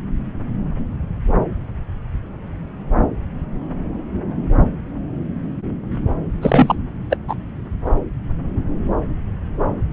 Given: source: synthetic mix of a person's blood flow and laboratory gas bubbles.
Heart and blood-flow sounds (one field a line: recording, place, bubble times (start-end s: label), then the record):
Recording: Doppler ultrasound of blood flow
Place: subclavian vein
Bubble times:
6.42-6.76 s: bubbles
7.10-7.17 s: bubbles
7.28-7.35 s: bubbles
From the record:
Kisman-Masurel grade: 213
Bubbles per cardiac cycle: several, 3 to 8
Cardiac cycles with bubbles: 1 to 10%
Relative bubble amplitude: loud (0.450 to 0.775)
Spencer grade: 1 (occasional bubble signal discernible with the cardiac motion signal, with majority of cardiac periods free of bubbles)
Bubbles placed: anywhere in the cardiac cycle